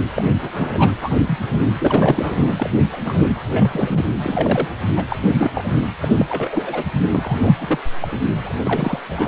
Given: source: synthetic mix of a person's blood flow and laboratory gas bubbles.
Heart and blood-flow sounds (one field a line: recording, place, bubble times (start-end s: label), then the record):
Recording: Doppler ultrasound of blood flow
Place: precordium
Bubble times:
0.14-0.24 s: bubbles
0.42-0.92 s: bubbles
1.00-1.18 s: bubbles
1.27-1.39 s: bubbles
1.51-1.62 s: bubbles
1.80-2.53 s: bubbles
2.56-2.86 s: bubbles
2.90-3.00 s: bubbles
3.04-3.29 s: bubbles
3.47-4.05 s: bubbles
4.23-4.68 s: bubbles
4.96-5.04 s: bubbles
5.09-5.18 s: bubbles
5.21-5.51 s: bubbles
5.54-5.87 s: bubbles
6.01-6.26 s: bubbles
6.29-6.84 s: bubbles
7.11-7.54 s: bubbles
7.58-7.79 s: bubbles
8.02-8.07 s: bubbles
8.11-8.20 s: bubbles
8.44-8.53 s: bubbles
8.63-8.99 s: bubbles
9.08-9.28 s: bubbles
From the record:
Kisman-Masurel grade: 242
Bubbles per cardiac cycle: several, 3 to 8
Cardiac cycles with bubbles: 100%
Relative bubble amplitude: moderate (0.250 to 0.450)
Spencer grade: 3 (all of the cardiac periods contain showers or single bubble signals, but not dominating or overriding the cardiac motion signals)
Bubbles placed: anywhere in the cardiac cycle